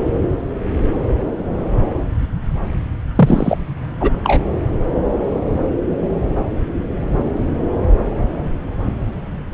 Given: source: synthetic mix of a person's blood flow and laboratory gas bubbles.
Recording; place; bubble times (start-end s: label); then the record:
Doppler ultrasound of blood flow; subclavian vein
3.15-3.57 s: bubbles
4.00-4.10 s: bubbles
4.24-4.39 s: bubbles
From the record:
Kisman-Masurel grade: 213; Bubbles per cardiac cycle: several, 3 to 8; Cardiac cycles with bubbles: 1 to 10%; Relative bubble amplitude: loud (0.450 to 0.775); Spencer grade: 1 (occasional bubble signal discernible with the cardiac motion signal, with majority of cardiac periods free of bubbles); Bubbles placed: anywhere in the cardiac cycle